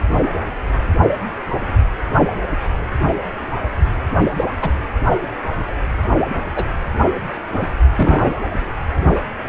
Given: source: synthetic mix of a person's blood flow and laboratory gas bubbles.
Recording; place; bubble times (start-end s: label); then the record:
Doppler ultrasound of blood flow; precordium
4.37-4.45 s: bubbles
4.61-4.71 s: bubbles
6.56-6.64 s: bubbles
7.53-7.67 s: bubbles
7.96-8.27 s: bubbles
From the record:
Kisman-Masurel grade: 122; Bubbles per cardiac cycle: 1 to 2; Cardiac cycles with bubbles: 10 to 50%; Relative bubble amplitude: moderate (0.250 to 0.450); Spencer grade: 2 (many but less than half of the cardiac periods contain bubble signals, singularly or in groups); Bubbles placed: only in the low amplitude regions of the cardiac cycle